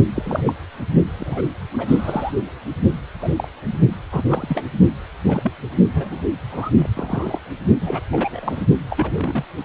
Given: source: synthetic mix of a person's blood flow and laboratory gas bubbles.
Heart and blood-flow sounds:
Doppler ultrasound of blood flow; precordium
0.15-0.43 s: bubbles
0.46-0.53 s: bubbles
1.18-1.47 s: bubbles
1.71-2.33 s: bubbles
3.21-3.29 s: bubbles
3.37-3.48 s: bubbles
3.65-3.73 s: bubbles
4.12-4.22 s: bubbles
4.29-4.66 s: bubbles
5.24-5.52 s: bubbles
5.94-6.23 s: bubbles
6.50-6.71 s: bubbles
6.75-6.89 s: bubbles
6.94-7.41 s: bubbles
7.81-8.01 s: bubbles
8.11-8.65 s: bubbles
8.90-9.44 s: bubbles
9.57-9.64 s: bubbles
From the record:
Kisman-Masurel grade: 242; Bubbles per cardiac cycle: several, 3 to 8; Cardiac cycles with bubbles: 100%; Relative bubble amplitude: moderate (0.250 to 0.450); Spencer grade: 3 (all of the cardiac periods contain showers or single bubble signals, but not dominating or overriding the cardiac motion signals); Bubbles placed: only in the low amplitude regions of the cardiac cycle

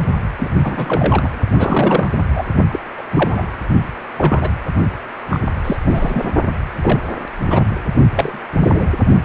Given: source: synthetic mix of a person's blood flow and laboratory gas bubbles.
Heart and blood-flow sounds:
Doppler ultrasound of blood flow; precordium
0.38-0.48 s: bubbles
0.64-1.37 s: bubbles
1.57-2.08 s: bubbles
2.35-2.44 s: bubbles
2.71-2.79 s: bubbles
2.97-3.02 s: bubbles
3.12-3.56 s: bubbles
4.17-4.51 s: bubbles
5.31-5.40 s: bubbles
5.64-5.77 s: bubbles
5.85-6.30 s: bubbles
6.81-7.00 s: bubbles
7.50-7.65 s: bubbles
8.15-8.38 s: bubbles
8.60-8.87 s: bubbles
From the record:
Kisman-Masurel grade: 232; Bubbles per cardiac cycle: several, 3 to 8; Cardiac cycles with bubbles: 50 to 99%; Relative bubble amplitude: moderate (0.250 to 0.450); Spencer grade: 3 (all of the cardiac periods contain showers or single bubble signals, but not dominating or overriding the cardiac motion signals); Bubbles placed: only in the low amplitude regions of the cardiac cycle

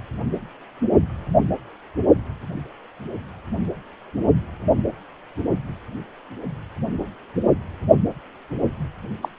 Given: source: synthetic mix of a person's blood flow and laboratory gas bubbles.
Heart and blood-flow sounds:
Doppler ultrasound of blood flow; precordium
9.21-9.29 s: bubbles
From the record:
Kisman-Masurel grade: 111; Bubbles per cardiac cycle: 1 to 2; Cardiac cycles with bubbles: 1 to 10%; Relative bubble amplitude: barely perceptible (0.100 to 0.250); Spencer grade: 1 (occasional bubble signal discernible with the cardiac motion signal, with majority of cardiac periods free of bubbles); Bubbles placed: only in the low amplitude regions of the cardiac cycle

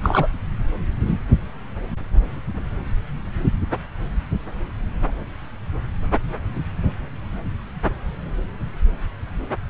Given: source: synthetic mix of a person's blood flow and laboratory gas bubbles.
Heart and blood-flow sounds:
Doppler ultrasound of blood flow; subclavian vein
0.03-0.28 s: bubbles
From the record:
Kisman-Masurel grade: 113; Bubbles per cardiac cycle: 1 to 2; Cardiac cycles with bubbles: 1 to 10%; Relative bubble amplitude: loud (0.450 to 0.775); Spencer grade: 1 (occasional bubble signal discernible with the cardiac motion signal, with majority of cardiac periods free of bubbles); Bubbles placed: anywhere in the cardiac cycle

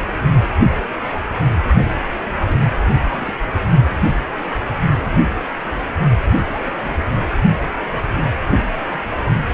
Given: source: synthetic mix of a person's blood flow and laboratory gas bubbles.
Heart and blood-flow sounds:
Doppler ultrasound of blood flow; precordium
1.85-1.90 s: bubbles
2.42-2.60 s: bubbles
3.08-3.35 s: bubbles
6.22-7.13 s: bubbles
8.91-8.99 s: bubbles
9.22-9.31 s: bubbles
9.42-9.50 s: bubbles
From the record:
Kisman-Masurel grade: 221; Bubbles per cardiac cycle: several, 3 to 8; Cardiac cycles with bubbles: 10 to 50%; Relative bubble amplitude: barely perceptible (0.100 to 0.250); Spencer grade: 2 (many but less than half of the cardiac periods contain bubble signals, singularly or in groups); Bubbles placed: only in the low amplitude regions of the cardiac cycle

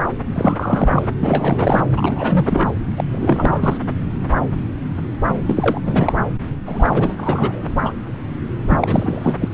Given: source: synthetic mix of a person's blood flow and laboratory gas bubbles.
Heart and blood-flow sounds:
Doppler ultrasound of blood flow; subclavian vein
0.34-1.08 s: bubbles
1.23-1.82 s: bubbles
1.97-2.68 s: bubbles
2.95-3.04 s: bubbles
3.09-3.79 s: bubbles
5.47-5.81 s: bubbles
5.84-6.17 s: bubbles
6.65-7.63 s: bubbles
7.83-7.94 s: bubbles
8.69-8.78 s: bubbles
8.81-9.33 s: bubbles
9.40-9.48 s: bubbles
From the record:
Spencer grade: 3 (all of the cardiac periods contain showers or single bubble signals, but not dominating or overriding the cardiac motion signals); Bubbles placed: anywhere in the cardiac cycle

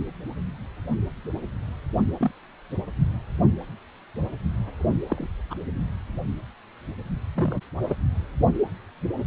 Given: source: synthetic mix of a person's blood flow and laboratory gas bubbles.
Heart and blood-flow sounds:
Doppler ultrasound of blood flow; precordium
2.19-2.31 s: bubbles
5.09-5.27 s: bubbles
5.50-5.54 s: bubbles
7.35-7.59 s: bubbles
7.89-7.96 s: bubbles
From the record:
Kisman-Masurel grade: 121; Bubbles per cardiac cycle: 1 to 2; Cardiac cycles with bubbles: 10 to 50%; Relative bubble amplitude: barely perceptible (0.100 to 0.250); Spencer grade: 2 (many but less than half of the cardiac periods contain bubble signals, singularly or in groups); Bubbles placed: only in the low amplitude regions of the cardiac cycle

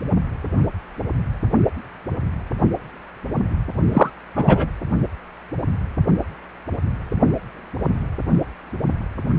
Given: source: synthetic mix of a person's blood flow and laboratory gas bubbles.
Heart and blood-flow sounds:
Doppler ultrasound of blood flow; precordium
3.92-4.10 s: bubbles
4.35-4.66 s: bubbles
From the record:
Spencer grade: 2 (many but less than half of the cardiac periods contain bubble signals, singularly or in groups); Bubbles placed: only in the low amplitude regions of the cardiac cycle

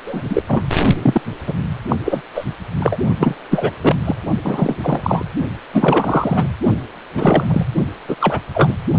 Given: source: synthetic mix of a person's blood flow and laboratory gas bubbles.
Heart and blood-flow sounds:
Doppler ultrasound of blood flow; precordium
0.07-0.43 s: bubbles
0.48-0.64 s: bubbles
1.03-1.22 s: bubbles
1.46-1.53 s: bubbles
1.88-1.96 s: bubbles
2.04-2.21 s: bubbles
2.34-2.45 s: bubbles
2.79-2.96 s: bubbles
3.20-3.34 s: bubbles
3.50-3.71 s: bubbles
3.81-3.96 s: bubbles
4.04-4.16 s: bubbles
4.44-4.75 s: bubbles
4.80-5.24 s: bubbles
5.74-6.48 s: bubbles
7.16-7.45 s: bubbles
7.49-7.65 s: bubbles
8.08-8.15 s: bubbles
8.20-8.39 s: bubbles
8.54-8.74 s: bubbles
From the record:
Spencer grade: 3 (all of the cardiac periods contain showers or single bubble signals, but not dominating or overriding the cardiac motion signals); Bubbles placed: only in the low amplitude regions of the cardiac cycle

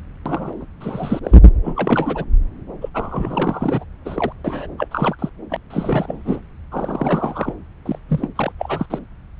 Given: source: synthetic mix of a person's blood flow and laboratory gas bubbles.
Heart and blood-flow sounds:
Doppler ultrasound of blood flow; subclavian vein
0.26-0.67 s: bubbles
0.80-1.20 s: bubbles
1.23-1.38 s: bubbles
1.64-2.25 s: bubbles
2.81-2.89 s: bubbles
2.94-3.84 s: bubbles
4.05-4.32 s: bubbles
4.44-4.66 s: bubbles
4.78-4.88 s: bubbles
4.91-5.16 s: bubbles
5.19-5.29 s: bubbles
5.49-5.56 s: bubbles
5.70-6.41 s: bubbles
6.71-7.53 s: bubbles
7.86-7.99 s: bubbles
8.09-8.30 s: bubbles
8.36-8.52 s: bubbles
8.59-8.86 s: bubbles
8.90-8.99 s: bubbles
From the record:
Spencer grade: 3 (all of the cardiac periods contain showers or single bubble signals, but not dominating or overriding the cardiac motion signals); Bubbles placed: anywhere in the cardiac cycle

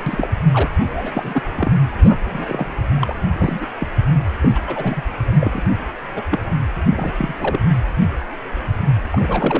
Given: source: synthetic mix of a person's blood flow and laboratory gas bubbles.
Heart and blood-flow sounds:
Doppler ultrasound of blood flow; precordium
0.06-0.29 s: bubbles
0.51-0.70 s: bubbles
0.79-1.42 s: bubbles
1.55-1.75 s: bubbles
2.08-2.18 s: bubbles
2.26-2.70 s: bubbles
3.01-3.16 s: bubbles
3.35-3.67 s: bubbles
3.80-3.88 s: bubbles
4.41-4.52 s: bubbles
4.54-4.59 s: bubbles
4.67-5.01 s: bubbles
5.40-5.61 s: bubbles
6.16-6.22 s: bubbles
6.30-6.42 s: bubbles
6.86-7.12 s: bubbles
7.17-7.33 s: bubbles
7.39-7.59 s: bubbles
9.12-9.59 s: bubbles
From the record:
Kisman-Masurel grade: 232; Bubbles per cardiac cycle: several, 3 to 8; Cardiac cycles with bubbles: 50 to 99%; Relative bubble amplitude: moderate (0.250 to 0.450); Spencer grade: 3 (all of the cardiac periods contain showers or single bubble signals, but not dominating or overriding the cardiac motion signals); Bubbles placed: anywhere in the cardiac cycle

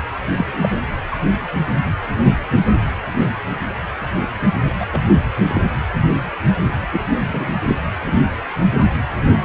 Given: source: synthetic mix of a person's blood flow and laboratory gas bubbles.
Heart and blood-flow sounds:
Doppler ultrasound of blood flow; precordium
0.38-0.45 s: bubbles
0.61-0.69 s: bubbles
1.11-1.17 s: bubbles
4.80-4.85 s: bubbles
4.92-5.01 s: bubbles
5.47-5.62 s: bubbles
6.92-7.01 s: bubbles
7.17-7.53 s: bubbles
7.67-7.75 s: bubbles
8.06-8.21 s: bubbles
From the record:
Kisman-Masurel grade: 122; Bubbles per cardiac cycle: 1 to 2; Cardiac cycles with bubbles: 10 to 50%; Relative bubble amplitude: moderate (0.250 to 0.450); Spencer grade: 2 (many but less than half of the cardiac periods contain bubble signals, singularly or in groups); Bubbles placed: anywhere in the cardiac cycle

